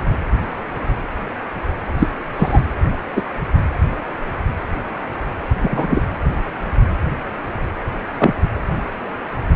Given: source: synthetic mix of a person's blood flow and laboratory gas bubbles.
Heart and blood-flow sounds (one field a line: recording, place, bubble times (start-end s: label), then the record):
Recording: Doppler ultrasound of blood flow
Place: precordium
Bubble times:
1.99-2.08 s: bubbles
2.37-2.61 s: bubbles
3.16-3.21 s: bubbles
5.62-6.00 s: bubbles
8.18-8.34 s: bubbles
From the record:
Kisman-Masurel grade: 123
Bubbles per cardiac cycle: 1 to 2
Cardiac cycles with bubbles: 10 to 50%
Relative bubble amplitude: loud (0.450 to 0.775)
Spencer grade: 2 (many but less than half of the cardiac periods contain bubble signals, singularly or in groups)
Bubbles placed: anywhere in the cardiac cycle